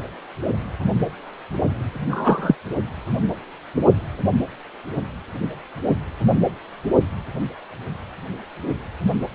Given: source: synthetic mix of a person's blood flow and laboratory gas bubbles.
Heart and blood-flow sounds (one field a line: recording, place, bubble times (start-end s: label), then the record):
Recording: Doppler ultrasound of blood flow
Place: precordium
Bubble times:
2.09-2.55 s: bubbles
From the record:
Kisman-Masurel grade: 113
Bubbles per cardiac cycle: 1 to 2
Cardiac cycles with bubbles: 1 to 10%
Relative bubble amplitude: loud (0.450 to 0.775)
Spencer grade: 1 (occasional bubble signal discernible with the cardiac motion signal, with majority of cardiac periods free of bubbles)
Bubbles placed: anywhere in the cardiac cycle